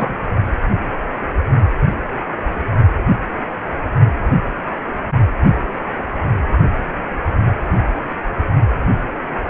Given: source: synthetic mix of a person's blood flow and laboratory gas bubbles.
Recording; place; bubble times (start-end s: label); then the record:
Doppler ultrasound of blood flow; precordium
0.00-0.18 s: bubbles
From the record:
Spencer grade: 1 (occasional bubble signal discernible with the cardiac motion signal, with majority of cardiac periods free of bubbles); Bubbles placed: only in the low amplitude regions of the cardiac cycle